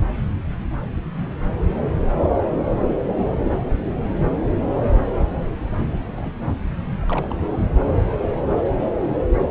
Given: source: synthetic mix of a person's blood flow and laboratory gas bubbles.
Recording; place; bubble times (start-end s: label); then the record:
Doppler ultrasound of blood flow; subclavian vein
3.25-3.34 s: bubbles
3.46-3.50 s: bubbles
6.16-6.34 s: bubbles
7.00-7.05 s: bubbles
7.08-7.40 s: bubbles
From the record:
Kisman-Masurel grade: 121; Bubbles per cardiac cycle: 1 to 2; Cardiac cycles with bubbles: 10 to 50%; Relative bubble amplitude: barely perceptible (0.100 to 0.250); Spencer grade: 2 (many but less than half of the cardiac periods contain bubble signals, singularly or in groups); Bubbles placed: anywhere in the cardiac cycle